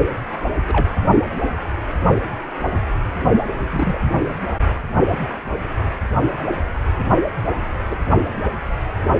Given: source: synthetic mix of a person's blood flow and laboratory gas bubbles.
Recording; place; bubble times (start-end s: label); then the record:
Doppler ultrasound of blood flow; precordium
0.67-0.92 s: bubbles
3.69-4.01 s: bubbles
7.90-7.99 s: bubbles
From the record:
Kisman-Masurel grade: 122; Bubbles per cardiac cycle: 1 to 2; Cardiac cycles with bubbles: 10 to 50%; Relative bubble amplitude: moderate (0.250 to 0.450); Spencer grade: 2 (many but less than half of the cardiac periods contain bubble signals, singularly or in groups); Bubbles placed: only in the low amplitude regions of the cardiac cycle